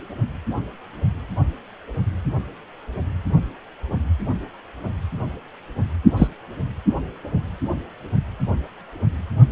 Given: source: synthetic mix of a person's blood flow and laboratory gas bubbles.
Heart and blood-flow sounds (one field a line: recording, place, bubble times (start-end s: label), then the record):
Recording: Doppler ultrasound of blood flow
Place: precordium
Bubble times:
6.17-6.28 s: bubbles
From the record:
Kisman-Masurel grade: 112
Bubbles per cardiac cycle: 1 to 2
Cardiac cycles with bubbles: 1 to 10%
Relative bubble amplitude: moderate (0.250 to 0.450)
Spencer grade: 1 (occasional bubble signal discernible with the cardiac motion signal, with majority of cardiac periods free of bubbles)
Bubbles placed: only in the low amplitude regions of the cardiac cycle